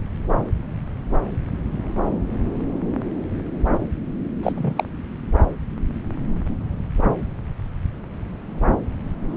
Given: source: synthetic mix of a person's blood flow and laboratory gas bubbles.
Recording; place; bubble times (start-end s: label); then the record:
Doppler ultrasound of blood flow; subclavian vein
4.43-4.85 s: bubbles
From the record:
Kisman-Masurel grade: 223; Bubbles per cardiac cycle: several, 3 to 8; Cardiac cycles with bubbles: 10 to 50%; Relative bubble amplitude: loud (0.450 to 0.775); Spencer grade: 2 (many but less than half of the cardiac periods contain bubble signals, singularly or in groups); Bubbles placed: anywhere in the cardiac cycle